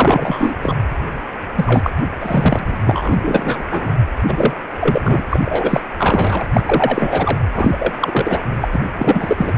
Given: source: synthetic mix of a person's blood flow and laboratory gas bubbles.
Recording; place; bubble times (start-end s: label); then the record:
Doppler ultrasound of blood flow; precordium
0.00-0.55 s: bubbles
0.62-0.76 s: bubbles
1.56-1.91 s: bubbles
2.20-2.77 s: bubbles
2.85-3.65 s: bubbles
3.70-3.94 s: bubbles
4.26-4.53 s: bubbles
4.80-5.25 s: bubbles
5.30-5.40 s: bubbles
5.44-5.80 s: bubbles
5.98-6.44 s: bubbles
6.53-6.62 s: bubbles
6.65-7.39 s: bubbles
7.53-7.93 s: bubbles
8.00-8.40 s: bubbles
8.60-8.68 s: bubbles
8.72-8.80 s: bubbles
8.99-9.52 s: bubbles
From the record:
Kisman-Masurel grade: 343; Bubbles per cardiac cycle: rolling drumbeat, 9 or more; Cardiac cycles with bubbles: 100%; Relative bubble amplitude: loud (0.450 to 0.775); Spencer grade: 3 (all of the cardiac periods contain showers or single bubble signals, but not dominating or overriding the cardiac motion signals); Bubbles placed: anywhere in the cardiac cycle